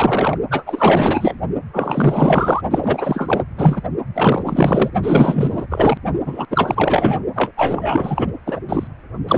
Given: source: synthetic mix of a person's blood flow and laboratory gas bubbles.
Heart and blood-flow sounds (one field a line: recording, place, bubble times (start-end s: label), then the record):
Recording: Doppler ultrasound of blood flow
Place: precordium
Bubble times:
0.00-0.38 s: bubbles
0.50-0.64 s: bubbles
0.66-1.40 s: bubbles
1.73-2.62 s: bubbles
2.70-3.44 s: bubbles
3.57-3.81 s: bubbles
4.14-4.90 s: bubbles
5.02-5.66 s: bubbles
5.69-5.97 s: bubbles
6.25-6.46 s: bubbles
6.50-7.22 s: bubbles
7.35-7.51 s: bubbles
7.57-8.28 s: bubbles
8.46-8.60 s: bubbles
8.69-8.88 s: bubbles
9.28-9.38 s: bubbles
From the record:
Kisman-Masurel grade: 444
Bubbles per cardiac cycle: continuous sound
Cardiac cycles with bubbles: 100%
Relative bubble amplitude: maximal (0.775 to 0.999)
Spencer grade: 4 (maximum detectable bubble signal sounding continuously throughout systole and diastole of every cardiac period, and overriding the amplitude of the normal cardiac signals)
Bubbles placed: only in the low amplitude regions of the cardiac cycle